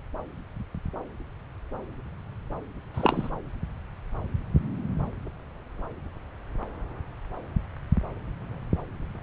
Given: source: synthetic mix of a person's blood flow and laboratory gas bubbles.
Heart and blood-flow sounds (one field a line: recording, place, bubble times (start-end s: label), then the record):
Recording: Doppler ultrasound of blood flow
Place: subclavian vein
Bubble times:
2.94-3.30 s: bubbles
From the record:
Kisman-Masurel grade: 122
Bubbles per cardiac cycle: 1 to 2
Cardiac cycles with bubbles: 10 to 50%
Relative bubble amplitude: moderate (0.250 to 0.450)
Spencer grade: 2 (many but less than half of the cardiac periods contain bubble signals, singularly or in groups)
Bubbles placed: anywhere in the cardiac cycle